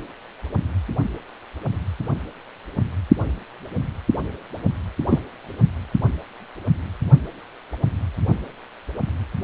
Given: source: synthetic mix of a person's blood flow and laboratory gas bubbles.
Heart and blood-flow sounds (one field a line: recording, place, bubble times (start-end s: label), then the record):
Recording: Doppler ultrasound of blood flow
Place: precordium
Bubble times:
5.09-5.18 s: bubbles
From the record:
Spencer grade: 2 (many but less than half of the cardiac periods contain bubble signals, singularly or in groups)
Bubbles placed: only in the low amplitude regions of the cardiac cycle